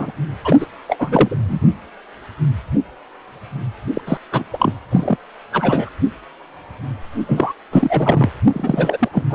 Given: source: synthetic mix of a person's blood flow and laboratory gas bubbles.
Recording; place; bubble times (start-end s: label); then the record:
Doppler ultrasound of blood flow; precordium
0.00-0.12 s: bubbles
0.44-0.67 s: bubbles
0.88-1.60 s: bubbles
3.94-4.02 s: bubbles
4.07-4.17 s: bubbles
4.31-4.44 s: bubbles
4.53-4.73 s: bubbles
4.91-5.17 s: bubbles
5.52-5.90 s: bubbles
7.28-7.53 s: bubbles
7.71-8.29 s: bubbles
8.52-9.08 s: bubbles
9.12-9.23 s: bubbles
9.30-9.35 s: bubbles
From the record:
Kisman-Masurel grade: 333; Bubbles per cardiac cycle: rolling drumbeat, 9 or more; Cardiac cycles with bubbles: 50 to 99%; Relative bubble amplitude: loud (0.450 to 0.775); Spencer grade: 3 (all of the cardiac periods contain showers or single bubble signals, but not dominating or overriding the cardiac motion signals); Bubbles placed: only in the low amplitude regions of the cardiac cycle